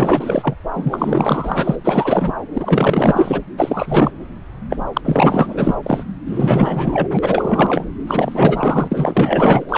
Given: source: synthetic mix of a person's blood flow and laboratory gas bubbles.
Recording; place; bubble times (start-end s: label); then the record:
Doppler ultrasound of blood flow; subclavian vein
0.00-0.54 s: bubbles
0.74-1.76 s: bubbles
1.82-2.34 s: bubbles
2.54-3.40 s: bubbles
3.57-4.12 s: bubbles
4.70-4.77 s: bubbles
4.93-5.01 s: bubbles
5.04-5.75 s: bubbles
5.83-6.04 s: bubbles
6.27-7.08 s: bubbles
7.11-7.19 s: bubbles
7.21-7.85 s: bubbles
8.07-9.64 s: bubbles
9.69-9.78 s: bubbles
From the record:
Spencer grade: 4 (maximum detectable bubble signal sounding continuously throughout systole and diastole of every cardiac period, and overriding the amplitude of the normal cardiac signals); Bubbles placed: anywhere in the cardiac cycle